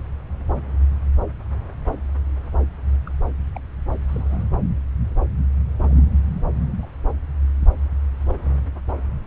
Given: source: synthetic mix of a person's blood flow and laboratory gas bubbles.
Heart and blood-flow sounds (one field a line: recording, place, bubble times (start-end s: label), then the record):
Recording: Doppler ultrasound of blood flow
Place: subclavian vein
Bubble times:
3.05-3.12 s: bubbles
3.54-3.58 s: bubbles
4.08-4.43 s: bubbles
4.52-4.59 s: bubbles
5.81-6.02 s: bubbles
6.77-6.87 s: bubbles
8.27-8.35 s: bubbles
From the record:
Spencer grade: 2 (many but less than half of the cardiac periods contain bubble signals, singularly or in groups)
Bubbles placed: anywhere in the cardiac cycle